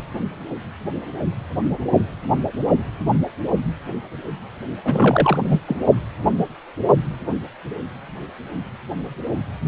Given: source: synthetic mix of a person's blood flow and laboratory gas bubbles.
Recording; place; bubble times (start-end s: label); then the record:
Doppler ultrasound of blood flow; precordium
0.00-0.04 s: bubbles
4.84-5.61 s: bubbles
5.67-5.81 s: bubbles
From the record:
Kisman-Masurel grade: 222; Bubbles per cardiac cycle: several, 3 to 8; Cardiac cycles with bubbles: 10 to 50%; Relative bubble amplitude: moderate (0.250 to 0.450); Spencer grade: 2 (many but less than half of the cardiac periods contain bubble signals, singularly or in groups); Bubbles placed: only in the low amplitude regions of the cardiac cycle